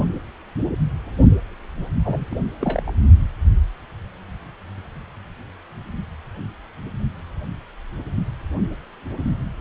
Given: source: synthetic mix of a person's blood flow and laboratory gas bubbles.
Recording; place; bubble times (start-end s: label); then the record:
Doppler ultrasound of blood flow; precordium
2.04-2.26 s: bubbles
2.31-2.35 s: bubbles
2.60-2.92 s: bubbles
From the record:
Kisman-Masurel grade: 222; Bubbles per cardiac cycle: several, 3 to 8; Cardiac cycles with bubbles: 10 to 50%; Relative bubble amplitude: moderate (0.250 to 0.450); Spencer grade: 2 (many but less than half of the cardiac periods contain bubble signals, singularly or in groups); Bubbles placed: only in the low amplitude regions of the cardiac cycle